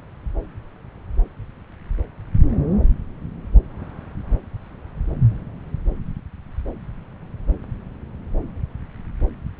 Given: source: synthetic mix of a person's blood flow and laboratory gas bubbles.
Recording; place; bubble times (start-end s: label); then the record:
Doppler ultrasound of blood flow; subclavian vein
no bubbles
From the record:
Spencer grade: 0 (complete lack of bubble signals)